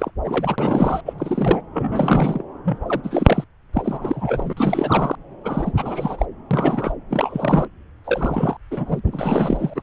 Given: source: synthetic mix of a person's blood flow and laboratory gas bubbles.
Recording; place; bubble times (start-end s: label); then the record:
Doppler ultrasound of blood flow; subclavian vein
0.00-0.10 s: bubbles
0.24-1.01 s: bubbles
1.06-1.13 s: bubbles
1.18-1.61 s: bubbles
1.73-2.44 s: bubbles
2.63-2.78 s: bubbles
2.86-3.00 s: bubbles
3.03-3.44 s: bubbles
3.73-4.53 s: bubbles
4.57-5.16 s: bubbles
5.44-5.72 s: bubbles
5.77-6.25 s: bubbles
6.50-6.95 s: bubbles
7.11-7.69 s: bubbles
8.04-8.57 s: bubbles
8.71-8.99 s: bubbles
9.06-9.83 s: bubbles
From the record:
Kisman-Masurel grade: 342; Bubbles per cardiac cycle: rolling drumbeat, 9 or more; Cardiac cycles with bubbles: 100%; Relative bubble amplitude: moderate (0.250 to 0.450); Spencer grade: 3 (all of the cardiac periods contain showers or single bubble signals, but not dominating or overriding the cardiac motion signals); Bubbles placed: anywhere in the cardiac cycle